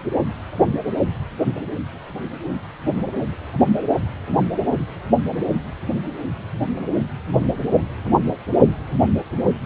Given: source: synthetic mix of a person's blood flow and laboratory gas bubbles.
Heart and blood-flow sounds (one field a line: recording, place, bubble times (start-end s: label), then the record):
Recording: Doppler ultrasound of blood flow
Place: precordium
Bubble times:
no bubbles
From the record:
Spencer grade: 0 (complete lack of bubble signals)